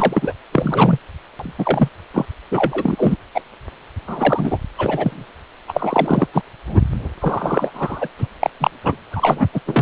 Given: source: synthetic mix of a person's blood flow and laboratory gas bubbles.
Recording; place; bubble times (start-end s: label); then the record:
Doppler ultrasound of blood flow; precordium
0.00-0.33 s: bubbles
0.52-0.98 s: bubbles
1.39-1.52 s: bubbles
1.58-1.89 s: bubbles
2.14-2.26 s: bubbles
2.51-3.17 s: bubbles
3.34-3.41 s: bubbles
4.06-4.58 s: bubbles
4.77-5.25 s: bubbles
5.68-6.26 s: bubbles
6.33-6.42 s: bubbles
6.67-6.81 s: bubbles
7.21-7.71 s: bubbles
7.74-8.09 s: bubbles
8.18-8.28 s: bubbles
8.40-8.50 s: bubbles
8.60-8.71 s: bubbles
8.83-8.96 s: bubbles
9.12-9.49 s: bubbles
9.54-9.61 s: bubbles
9.67-9.82 s: bubbles
From the record:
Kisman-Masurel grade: 243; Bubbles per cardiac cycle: several, 3 to 8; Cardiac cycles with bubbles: 100%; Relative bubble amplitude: loud (0.450 to 0.775); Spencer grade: 3 (all of the cardiac periods contain showers or single bubble signals, but not dominating or overriding the cardiac motion signals); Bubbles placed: anywhere in the cardiac cycle